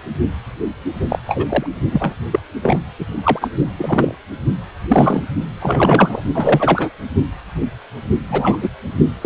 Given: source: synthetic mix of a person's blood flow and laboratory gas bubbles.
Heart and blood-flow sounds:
Doppler ultrasound of blood flow; precordium
1.09-1.18 s: bubbles
1.27-1.45 s: bubbles
1.48-1.67 s: bubbles
1.91-2.15 s: bubbles
2.31-2.40 s: bubbles
2.62-2.80 s: bubbles
2.99-3.06 s: bubbles
3.24-3.49 s: bubbles
3.77-4.15 s: bubbles
4.88-5.22 s: bubbles
5.60-6.22 s: bubbles
6.34-6.89 s: bubbles
8.28-8.58 s: bubbles
8.62-8.70 s: bubbles
9.21-9.26 s: bubbles
From the record:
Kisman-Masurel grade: 233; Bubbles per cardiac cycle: several, 3 to 8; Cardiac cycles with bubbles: 50 to 99%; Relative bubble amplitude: loud (0.450 to 0.775); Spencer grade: 3 (all of the cardiac periods contain showers or single bubble signals, but not dominating or overriding the cardiac motion signals); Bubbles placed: only in the low amplitude regions of the cardiac cycle

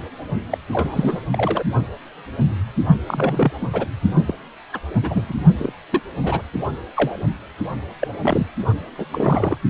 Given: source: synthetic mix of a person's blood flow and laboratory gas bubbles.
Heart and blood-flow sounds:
Doppler ultrasound of blood flow; precordium
0.50-0.58 s: bubbles
0.73-1.21 s: bubbles
1.32-1.63 s: bubbles
3.07-3.52 s: bubbles
3.61-3.67 s: bubbles
3.73-3.85 s: bubbles
4.26-4.34 s: bubbles
4.72-4.79 s: bubbles
5.02-5.23 s: bubbles
5.29-5.33 s: bubbles
5.58-5.72 s: bubbles
5.92-6.00 s: bubbles
6.23-6.42 s: bubbles
6.53-6.59 s: bubbles
6.93-7.18 s: bubbles
8.01-8.07 s: bubbles
8.22-8.46 s: bubbles
8.97-9.05 s: bubbles
9.12-9.57 s: bubbles
From the record:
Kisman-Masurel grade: 232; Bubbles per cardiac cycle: several, 3 to 8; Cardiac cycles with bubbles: 50 to 99%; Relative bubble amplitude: moderate (0.250 to 0.450); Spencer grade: 3 (all of the cardiac periods contain showers or single bubble signals, but not dominating or overriding the cardiac motion signals); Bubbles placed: only in the low amplitude regions of the cardiac cycle

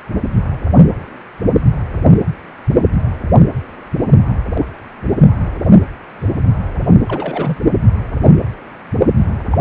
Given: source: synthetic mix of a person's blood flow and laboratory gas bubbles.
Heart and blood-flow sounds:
Doppler ultrasound of blood flow; precordium
7.01-7.57 s: bubbles
9.51-9.58 s: bubbles
From the record:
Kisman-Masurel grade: 212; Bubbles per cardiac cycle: several, 3 to 8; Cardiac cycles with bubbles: 1 to 10%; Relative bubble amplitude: moderate (0.250 to 0.450); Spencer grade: 1 (occasional bubble signal discernible with the cardiac motion signal, with majority of cardiac periods free of bubbles); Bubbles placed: anywhere in the cardiac cycle

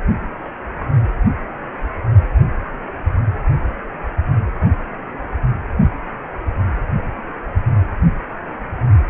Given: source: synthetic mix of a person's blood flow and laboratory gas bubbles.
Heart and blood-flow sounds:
Doppler ultrasound of blood flow; precordium
no bubbles
From the record:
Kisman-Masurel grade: 000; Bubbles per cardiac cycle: 0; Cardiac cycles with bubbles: 0%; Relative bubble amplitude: no bubbles discernible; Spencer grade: 0 (complete lack of bubble signals)

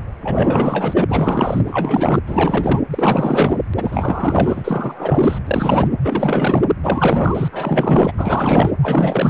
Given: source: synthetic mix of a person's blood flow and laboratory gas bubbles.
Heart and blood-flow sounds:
Doppler ultrasound of blood flow; precordium
0.22-1.04 s: bubbles
1.08-1.60 s: bubbles
1.66-2.21 s: bubbles
2.26-2.80 s: bubbles
2.90-3.57 s: bubbles
3.76-5.39 s: bubbles
5.46-5.89 s: bubbles
6.02-6.64 s: bubbles
6.83-7.48 s: bubbles
7.52-8.12 s: bubbles
8.18-8.71 s: bubbles
8.83-9.30 s: bubbles
From the record:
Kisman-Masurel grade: 444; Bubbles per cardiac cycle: continuous sound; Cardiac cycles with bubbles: 100%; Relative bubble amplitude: maximal (0.775 to 0.999); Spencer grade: 4 (maximum detectable bubble signal sounding continuously throughout systole and diastole of every cardiac period, and overriding the amplitude of the normal cardiac signals); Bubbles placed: anywhere in the cardiac cycle

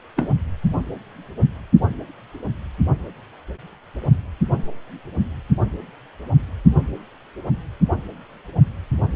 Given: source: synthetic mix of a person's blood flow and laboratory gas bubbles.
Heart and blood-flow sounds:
Doppler ultrasound of blood flow; precordium
0.16-0.30 s: bubbles
From the record:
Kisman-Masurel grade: 212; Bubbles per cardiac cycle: several, 3 to 8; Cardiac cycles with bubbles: 1 to 10%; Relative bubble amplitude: moderate (0.250 to 0.450); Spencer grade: 1 (occasional bubble signal discernible with the cardiac motion signal, with majority of cardiac periods free of bubbles); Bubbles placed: only in the low amplitude regions of the cardiac cycle

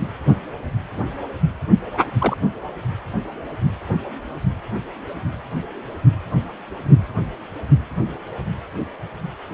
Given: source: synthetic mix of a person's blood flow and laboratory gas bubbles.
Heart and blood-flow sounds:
Doppler ultrasound of blood flow; precordium
2.19-2.36 s: bubbles
From the record:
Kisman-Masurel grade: 113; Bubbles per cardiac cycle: 1 to 2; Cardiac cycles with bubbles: 1 to 10%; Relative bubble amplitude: loud (0.450 to 0.775); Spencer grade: 1 (occasional bubble signal discernible with the cardiac motion signal, with majority of cardiac periods free of bubbles); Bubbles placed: anywhere in the cardiac cycle

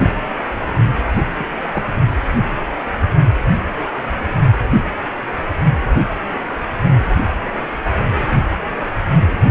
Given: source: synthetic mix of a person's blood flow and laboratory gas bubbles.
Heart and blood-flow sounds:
Doppler ultrasound of blood flow; precordium
0.00-0.10 s: bubbles
1.38-1.45 s: bubbles
1.71-1.84 s: bubbles
From the record:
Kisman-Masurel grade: 121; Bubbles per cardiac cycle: 1 to 2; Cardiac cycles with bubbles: 10 to 50%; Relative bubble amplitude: barely perceptible (0.100 to 0.250); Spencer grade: 2 (many but less than half of the cardiac periods contain bubble signals, singularly or in groups); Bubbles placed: anywhere in the cardiac cycle

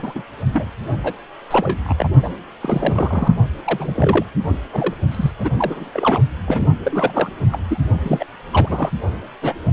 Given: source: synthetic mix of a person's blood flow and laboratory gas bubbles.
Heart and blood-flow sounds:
Doppler ultrasound of blood flow; precordium
0.00-0.23 s: bubbles
0.53-0.66 s: bubbles
1.03-1.13 s: bubbles
1.50-1.78 s: bubbles
1.83-1.96 s: bubbles
1.99-2.08 s: bubbles
2.23-2.30 s: bubbles
2.62-3.35 s: bubbles
3.65-4.25 s: bubbles
4.42-4.57 s: bubbles
4.73-4.94 s: bubbles
5.11-5.31 s: bubbles
5.38-5.50 s: bubbles
5.57-5.90 s: bubbles
5.94-6.21 s: bubbles
6.46-6.66 s: bubbles
6.83-7.30 s: bubbles
7.52-7.58 s: bubbles
7.67-7.78 s: bubbles
8.03-8.25 s: bubbles
8.51-8.90 s: bubbles
9.42-9.54 s: bubbles
From the record:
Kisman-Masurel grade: 342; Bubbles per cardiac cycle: rolling drumbeat, 9 or more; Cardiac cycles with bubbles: 100%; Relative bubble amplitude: moderate (0.250 to 0.450); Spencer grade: 3 (all of the cardiac periods contain showers or single bubble signals, but not dominating or overriding the cardiac motion signals); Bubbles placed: only in the low amplitude regions of the cardiac cycle

